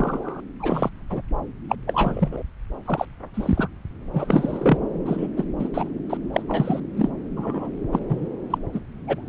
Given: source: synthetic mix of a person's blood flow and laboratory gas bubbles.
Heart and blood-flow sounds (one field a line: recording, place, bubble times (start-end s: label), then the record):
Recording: Doppler ultrasound of blood flow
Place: subclavian vein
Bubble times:
0.00-0.41 s: bubbles
0.60-0.89 s: bubbles
1.10-1.22 s: bubbles
1.69-1.75 s: bubbles
1.87-2.43 s: bubbles
2.85-3.06 s: bubbles
3.34-3.68 s: bubbles
4.13-4.77 s: bubbles
5.05-5.27 s: bubbles
5.36-5.44 s: bubbles
5.58-5.68 s: bubbles
5.74-5.89 s: bubbles
6.09-6.17 s: bubbles
6.32-6.42 s: bubbles
6.48-6.80 s: bubbles
6.96-7.10 s: bubbles
7.36-7.69 s: bubbles
7.92-7.99 s: bubbles
8.08-8.26 s: bubbles
8.50-8.58 s: bubbles
8.72-8.80 s: bubbles
9.07-9.21 s: bubbles
From the record:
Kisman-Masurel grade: 242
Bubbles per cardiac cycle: several, 3 to 8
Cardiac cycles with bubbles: 100%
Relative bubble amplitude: moderate (0.250 to 0.450)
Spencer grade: 3 (all of the cardiac periods contain showers or single bubble signals, but not dominating or overriding the cardiac motion signals)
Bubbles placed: anywhere in the cardiac cycle